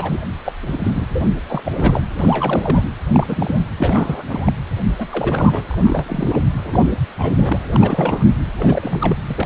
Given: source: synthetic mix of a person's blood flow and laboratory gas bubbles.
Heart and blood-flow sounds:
Doppler ultrasound of blood flow; precordium
0.00-0.21 s: bubbles
0.45-0.53 s: bubbles
0.61-1.04 s: bubbles
1.10-1.27 s: bubbles
1.48-1.72 s: bubbles
1.75-2.03 s: bubbles
2.19-2.84 s: bubbles
3.08-3.62 s: bubbles
3.78-4.24 s: bubbles
4.29-4.52 s: bubbles
4.82-4.95 s: bubbles
4.97-6.46 s: bubbles
6.64-6.94 s: bubbles
7.18-7.58 s: bubbles
7.71-8.25 s: bubbles
8.58-9.18 s: bubbles
9.28-9.46 s: bubbles
From the record:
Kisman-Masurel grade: 342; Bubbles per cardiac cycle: rolling drumbeat, 9 or more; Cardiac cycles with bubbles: 100%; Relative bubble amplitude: moderate (0.250 to 0.450); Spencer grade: 3 (all of the cardiac periods contain showers or single bubble signals, but not dominating or overriding the cardiac motion signals); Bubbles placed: anywhere in the cardiac cycle

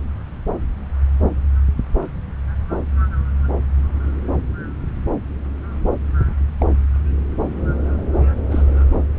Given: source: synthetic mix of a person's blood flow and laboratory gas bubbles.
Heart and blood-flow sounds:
Doppler ultrasound of blood flow; subclavian vein
6.59-6.66 s: bubbles
8.50-8.63 s: bubbles
From the record:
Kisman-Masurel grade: 111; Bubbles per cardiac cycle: 1 to 2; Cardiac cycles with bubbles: 1 to 10%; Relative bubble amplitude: barely perceptible (0.100 to 0.250); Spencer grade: 1 (occasional bubble signal discernible with the cardiac motion signal, with majority of cardiac periods free of bubbles); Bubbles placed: anywhere in the cardiac cycle

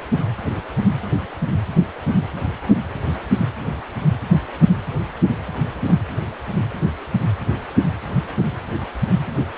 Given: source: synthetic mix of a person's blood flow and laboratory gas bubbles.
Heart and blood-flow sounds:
Doppler ultrasound of blood flow; precordium
5.87-5.95 s: bubbles
From the record:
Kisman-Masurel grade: 112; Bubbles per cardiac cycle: 1 to 2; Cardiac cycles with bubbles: 1 to 10%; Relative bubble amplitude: moderate (0.250 to 0.450); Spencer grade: 1 (occasional bubble signal discernible with the cardiac motion signal, with majority of cardiac periods free of bubbles); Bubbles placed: anywhere in the cardiac cycle

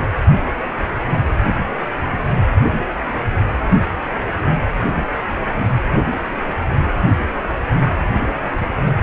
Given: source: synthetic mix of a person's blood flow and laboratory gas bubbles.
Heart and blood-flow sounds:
Doppler ultrasound of blood flow; precordium
no bubbles
From the record:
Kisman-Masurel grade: 000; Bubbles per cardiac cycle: 0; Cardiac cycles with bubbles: 0%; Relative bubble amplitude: no bubbles discernible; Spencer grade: 0 (complete lack of bubble signals)

